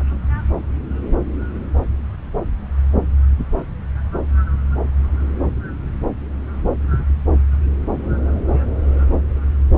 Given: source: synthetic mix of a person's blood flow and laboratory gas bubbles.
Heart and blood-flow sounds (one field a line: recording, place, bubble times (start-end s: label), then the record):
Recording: Doppler ultrasound of blood flow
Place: subclavian vein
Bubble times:
no bubbles
From the record:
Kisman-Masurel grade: 000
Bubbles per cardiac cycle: 0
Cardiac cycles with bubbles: 0%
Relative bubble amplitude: no bubbles discernible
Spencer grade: 0 (complete lack of bubble signals)